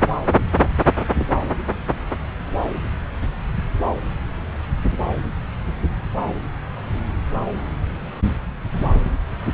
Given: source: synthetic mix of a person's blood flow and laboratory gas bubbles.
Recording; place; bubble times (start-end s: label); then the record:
Doppler ultrasound of blood flow; subclavian vein
1.19-1.26 s: bubbles
From the record:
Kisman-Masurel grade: 112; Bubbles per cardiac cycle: 1 to 2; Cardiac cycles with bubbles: 1 to 10%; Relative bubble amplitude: moderate (0.250 to 0.450); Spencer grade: 1 (occasional bubble signal discernible with the cardiac motion signal, with majority of cardiac periods free of bubbles); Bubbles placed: anywhere in the cardiac cycle